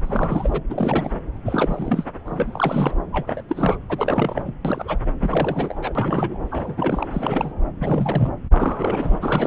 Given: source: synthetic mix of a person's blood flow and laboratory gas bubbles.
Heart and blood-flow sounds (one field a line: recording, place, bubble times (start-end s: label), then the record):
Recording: Doppler ultrasound of blood flow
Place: subclavian vein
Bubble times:
0.02-0.60 s: bubbles
0.70-1.15 s: bubbles
1.45-2.05 s: bubbles
2.25-2.97 s: bubbles
3.12-3.42 s: bubbles
3.48-3.78 s: bubbles
3.89-4.54 s: bubbles
4.64-5.04 s: bubbles
5.20-6.38 s: bubbles
6.50-7.06 s: bubbles
7.12-7.52 s: bubbles
7.80-8.33 s: bubbles
8.51-9.47 s: bubbles
From the record:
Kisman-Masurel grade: 343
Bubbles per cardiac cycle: rolling drumbeat, 9 or more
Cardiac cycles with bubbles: 100%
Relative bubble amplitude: loud (0.450 to 0.775)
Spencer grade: 3 (all of the cardiac periods contain showers or single bubble signals, but not dominating or overriding the cardiac motion signals)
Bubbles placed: anywhere in the cardiac cycle